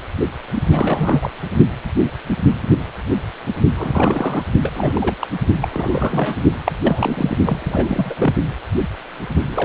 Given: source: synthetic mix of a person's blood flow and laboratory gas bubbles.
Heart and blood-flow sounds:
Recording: Doppler ultrasound of blood flow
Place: precordium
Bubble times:
0.55-0.63 s: bubbles
0.71-1.30 s: bubbles
3.71-4.43 s: bubbles
4.62-4.72 s: bubbles
4.75-5.17 s: bubbles
5.20-5.29 s: bubbles
5.61-6.39 s: bubbles
6.66-6.72 s: bubbles
6.83-7.38 s: bubbles
7.45-8.14 s: bubbles
8.19-8.34 s: bubbles
9.45-9.65 s: bubbles
From the record:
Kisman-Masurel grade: 332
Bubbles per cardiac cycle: rolling drumbeat, 9 or more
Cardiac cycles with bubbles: 50 to 99%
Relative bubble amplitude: moderate (0.250 to 0.450)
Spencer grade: 3 (all of the cardiac periods contain showers or single bubble signals, but not dominating or overriding the cardiac motion signals)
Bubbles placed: only in the low amplitude regions of the cardiac cycle

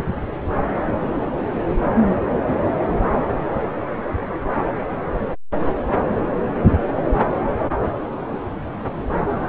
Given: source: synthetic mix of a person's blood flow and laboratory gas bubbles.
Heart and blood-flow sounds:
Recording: Doppler ultrasound of blood flow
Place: subclavian vein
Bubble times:
no bubbles
From the record:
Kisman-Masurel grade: 000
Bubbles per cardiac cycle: 0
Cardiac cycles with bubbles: 0%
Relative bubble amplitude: no bubbles discernible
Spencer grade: 0 (complete lack of bubble signals)

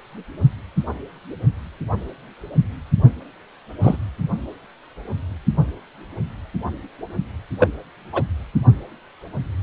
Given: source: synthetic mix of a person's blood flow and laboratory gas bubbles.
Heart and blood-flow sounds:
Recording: Doppler ultrasound of blood flow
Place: precordium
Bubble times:
3.82-3.97 s: bubbles
7.58-7.68 s: bubbles
8.12-8.22 s: bubbles
From the record:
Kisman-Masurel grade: 123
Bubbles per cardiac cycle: 1 to 2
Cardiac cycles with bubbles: 10 to 50%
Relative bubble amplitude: loud (0.450 to 0.775)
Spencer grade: 2 (many but less than half of the cardiac periods contain bubble signals, singularly or in groups)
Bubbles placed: only in the low amplitude regions of the cardiac cycle

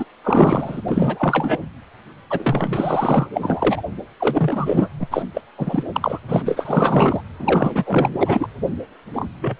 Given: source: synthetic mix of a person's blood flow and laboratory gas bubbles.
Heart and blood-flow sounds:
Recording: Doppler ultrasound of blood flow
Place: precordium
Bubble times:
0.00-0.05 s: bubbles
0.24-0.81 s: bubbles
0.88-1.57 s: bubbles
2.30-3.29 s: bubbles
3.33-3.82 s: bubbles
4.20-4.89 s: bubbles
5.00-5.07 s: bubbles
5.11-5.23 s: bubbles
5.34-5.42 s: bubbles
5.58-5.84 s: bubbles
5.93-6.20 s: bubbles
6.28-6.43 s: bubbles
6.45-7.21 s: bubbles
7.39-8.47 s: bubbles
9.12-9.29 s: bubbles
9.41-9.56 s: bubbles
From the record:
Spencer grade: 4 (maximum detectable bubble signal sounding continuously throughout systole and diastole of every cardiac period, and overriding the amplitude of the normal cardiac signals)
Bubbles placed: anywhere in the cardiac cycle

